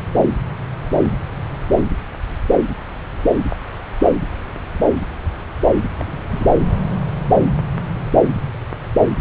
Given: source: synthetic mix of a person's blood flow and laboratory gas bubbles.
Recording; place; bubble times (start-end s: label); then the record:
Doppler ultrasound of blood flow; subclavian vein
6.00-6.24 s: bubbles
6.31-6.47 s: bubbles
From the record:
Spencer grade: 1 (occasional bubble signal discernible with the cardiac motion signal, with majority of cardiac periods free of bubbles); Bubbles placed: anywhere in the cardiac cycle